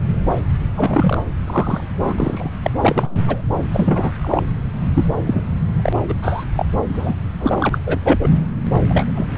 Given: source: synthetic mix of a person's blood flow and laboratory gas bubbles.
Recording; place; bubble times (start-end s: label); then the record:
Doppler ultrasound of blood flow; subclavian vein
0.77-1.21 s: bubbles
1.46-1.81 s: bubbles
2.00-2.50 s: bubbles
2.62-2.71 s: bubbles
2.81-3.43 s: bubbles
3.73-4.11 s: bubbles
4.21-4.43 s: bubbles
4.96-5.04 s: bubbles
5.10-5.44 s: bubbles
5.72-5.93 s: bubbles
6.08-6.14 s: bubbles
6.22-6.44 s: bubbles
6.55-6.65 s: bubbles
6.89-7.14 s: bubbles
7.39-7.78 s: bubbles
7.86-7.98 s: bubbles
8.04-8.20 s: bubbles
8.22-8.30 s: bubbles
8.89-9.11 s: bubbles
9.15-9.26 s: bubbles
From the record:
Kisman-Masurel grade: 242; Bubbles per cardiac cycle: several, 3 to 8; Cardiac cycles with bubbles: 100%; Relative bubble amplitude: moderate (0.250 to 0.450); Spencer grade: 3 (all of the cardiac periods contain showers or single bubble signals, but not dominating or overriding the cardiac motion signals); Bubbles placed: anywhere in the cardiac cycle